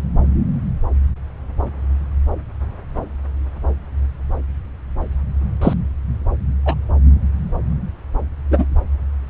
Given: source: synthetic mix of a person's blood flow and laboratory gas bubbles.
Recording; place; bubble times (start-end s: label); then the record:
Doppler ultrasound of blood flow; subclavian vein
5.61-5.73 s: bubbles
6.65-6.75 s: bubbles
8.51-8.66 s: bubbles
From the record:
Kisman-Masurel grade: 123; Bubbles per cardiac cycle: 1 to 2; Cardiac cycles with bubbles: 10 to 50%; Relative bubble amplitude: loud (0.450 to 0.775); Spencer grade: 2 (many but less than half of the cardiac periods contain bubble signals, singularly or in groups); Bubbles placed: anywhere in the cardiac cycle